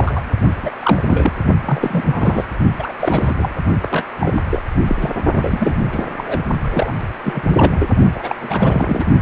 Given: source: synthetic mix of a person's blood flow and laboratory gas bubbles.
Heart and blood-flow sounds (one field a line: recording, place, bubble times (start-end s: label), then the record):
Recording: Doppler ultrasound of blood flow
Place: precordium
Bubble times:
0.00-0.22 s: bubbles
0.45-0.54 s: bubbles
0.62-0.71 s: bubbles
0.79-1.03 s: bubbles
1.06-1.32 s: bubbles
1.65-2.44 s: bubbles
2.79-2.93 s: bubbles
3.00-3.54 s: bubbles
3.81-4.05 s: bubbles
4.20-4.42 s: bubbles
4.50-4.62 s: bubbles
4.87-4.96 s: bubbles
5.00-5.10 s: bubbles
5.32-6.14 s: bubbles
6.17-6.42 s: bubbles
6.62-6.93 s: bubbles
7.24-7.42 s: bubbles
7.49-7.87 s: bubbles
8.15-8.36 s: bubbles
8.39-9.05 s: bubbles
9.19-9.22 s: bubbles
From the record:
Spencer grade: 3 (all of the cardiac periods contain showers or single bubble signals, but not dominating or overriding the cardiac motion signals)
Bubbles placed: only in the low amplitude regions of the cardiac cycle